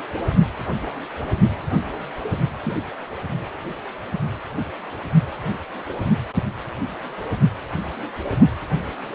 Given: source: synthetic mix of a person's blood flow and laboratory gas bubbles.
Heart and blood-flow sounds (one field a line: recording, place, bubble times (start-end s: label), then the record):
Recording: Doppler ultrasound of blood flow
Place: precordium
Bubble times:
2.65-2.75 s: bubbles
From the record:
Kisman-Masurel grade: 123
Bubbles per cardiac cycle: 1 to 2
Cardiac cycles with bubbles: 10 to 50%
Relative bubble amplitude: loud (0.450 to 0.775)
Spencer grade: 2 (many but less than half of the cardiac periods contain bubble signals, singularly or in groups)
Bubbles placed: only in the low amplitude regions of the cardiac cycle